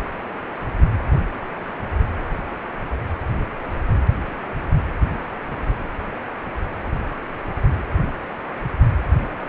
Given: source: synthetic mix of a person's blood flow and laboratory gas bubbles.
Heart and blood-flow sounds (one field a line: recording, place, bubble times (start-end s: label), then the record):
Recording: Doppler ultrasound of blood flow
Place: precordium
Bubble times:
no bubbles
From the record:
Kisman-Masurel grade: 000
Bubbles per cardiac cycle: 0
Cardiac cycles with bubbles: 0%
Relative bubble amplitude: no bubbles discernible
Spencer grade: 0 (complete lack of bubble signals)